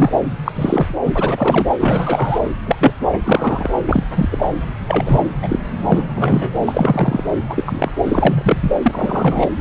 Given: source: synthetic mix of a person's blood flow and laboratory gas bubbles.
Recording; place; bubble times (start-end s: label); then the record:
Doppler ultrasound of blood flow; subclavian vein
0.00-0.12 s: bubbles
0.44-0.52 s: bubbles
0.54-0.96 s: bubbles
1.04-1.10 s: bubbles
1.14-1.72 s: bubbles
1.79-2.40 s: bubbles
2.65-2.76 s: bubbles
2.79-2.92 s: bubbles
3.25-3.73 s: bubbles
3.86-4.03 s: bubbles
4.15-4.49 s: bubbles
4.87-5.21 s: bubbles
5.42-5.60 s: bubbles
5.89-6.04 s: bubbles
6.15-7.23 s: bubbles
7.49-7.91 s: bubbles
8.05-8.71 s: bubbles
8.82-9.49 s: bubbles
From the record:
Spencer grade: 3 (all of the cardiac periods contain showers or single bubble signals, but not dominating or overriding the cardiac motion signals); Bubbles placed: anywhere in the cardiac cycle